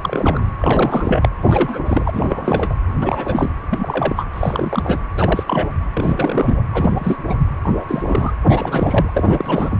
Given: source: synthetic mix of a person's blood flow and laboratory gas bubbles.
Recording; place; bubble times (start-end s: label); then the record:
Doppler ultrasound of blood flow; precordium
0.01-0.46 s: bubbles
0.58-1.29 s: bubbles
1.44-1.80 s: bubbles
1.86-2.10 s: bubbles
2.13-2.75 s: bubbles
3.00-3.50 s: bubbles
3.70-4.25 s: bubbles
4.33-5.03 s: bubbles
5.17-5.43 s: bubbles
5.47-5.71 s: bubbles
5.93-6.62 s: bubbles
6.73-7.20 s: bubbles
7.26-7.35 s: bubbles
7.62-7.85 s: bubbles
7.88-8.32 s: bubbles
8.42-9.77 s: bubbles
From the record:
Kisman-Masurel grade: 342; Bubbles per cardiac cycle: rolling drumbeat, 9 or more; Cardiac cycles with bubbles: 100%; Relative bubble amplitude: moderate (0.250 to 0.450); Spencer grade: 3 (all of the cardiac periods contain showers or single bubble signals, but not dominating or overriding the cardiac motion signals); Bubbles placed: anywhere in the cardiac cycle